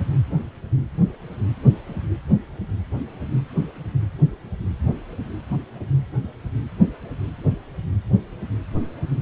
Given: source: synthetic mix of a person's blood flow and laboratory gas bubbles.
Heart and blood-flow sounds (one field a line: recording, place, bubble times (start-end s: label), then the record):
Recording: Doppler ultrasound of blood flow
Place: precordium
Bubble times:
8.75-8.82 s: bubbles
From the record:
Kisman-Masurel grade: 121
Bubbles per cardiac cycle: 1 to 2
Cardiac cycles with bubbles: 10 to 50%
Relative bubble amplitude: barely perceptible (0.100 to 0.250)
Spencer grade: 2 (many but less than half of the cardiac periods contain bubble signals, singularly or in groups)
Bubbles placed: anywhere in the cardiac cycle